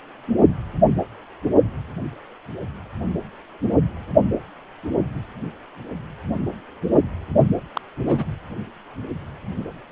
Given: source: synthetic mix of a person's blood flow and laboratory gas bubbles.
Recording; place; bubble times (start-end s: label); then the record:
Doppler ultrasound of blood flow; precordium
7.74-7.81 s: bubbles
8.04-8.24 s: bubbles
From the record:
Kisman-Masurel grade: 122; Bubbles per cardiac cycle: 1 to 2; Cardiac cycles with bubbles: 10 to 50%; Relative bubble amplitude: moderate (0.250 to 0.450); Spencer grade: 2 (many but less than half of the cardiac periods contain bubble signals, singularly or in groups); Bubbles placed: only in the low amplitude regions of the cardiac cycle